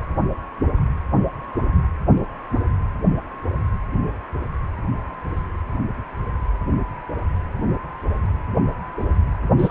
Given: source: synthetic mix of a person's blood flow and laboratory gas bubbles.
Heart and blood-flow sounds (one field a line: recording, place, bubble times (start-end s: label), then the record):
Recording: Doppler ultrasound of blood flow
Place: precordium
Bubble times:
9.58-9.71 s: bubbles
From the record:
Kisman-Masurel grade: 223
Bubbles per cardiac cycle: several, 3 to 8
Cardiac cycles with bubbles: 10 to 50%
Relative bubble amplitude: loud (0.450 to 0.775)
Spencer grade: 2 (many but less than half of the cardiac periods contain bubble signals, singularly or in groups)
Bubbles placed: anywhere in the cardiac cycle